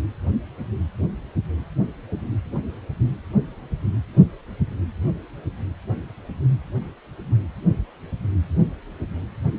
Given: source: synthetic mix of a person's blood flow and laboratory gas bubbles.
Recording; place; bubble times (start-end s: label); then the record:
Doppler ultrasound of blood flow; precordium
no bubbles
From the record:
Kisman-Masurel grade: 000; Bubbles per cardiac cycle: 0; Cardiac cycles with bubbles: 0%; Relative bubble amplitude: no bubbles discernible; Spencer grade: 0 (complete lack of bubble signals)